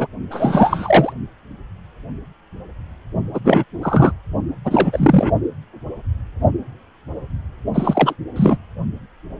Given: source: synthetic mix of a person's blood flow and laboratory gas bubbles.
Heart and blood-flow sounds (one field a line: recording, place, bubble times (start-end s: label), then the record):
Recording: Doppler ultrasound of blood flow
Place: precordium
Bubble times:
0.00-0.07 s: bubbles
0.30-1.12 s: bubbles
3.33-3.40 s: bubbles
3.44-3.64 s: bubbles
3.81-4.12 s: bubbles
4.64-5.30 s: bubbles
7.74-8.15 s: bubbles
8.36-8.57 s: bubbles
From the record:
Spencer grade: 3 (all of the cardiac periods contain showers or single bubble signals, but not dominating or overriding the cardiac motion signals)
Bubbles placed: only in the low amplitude regions of the cardiac cycle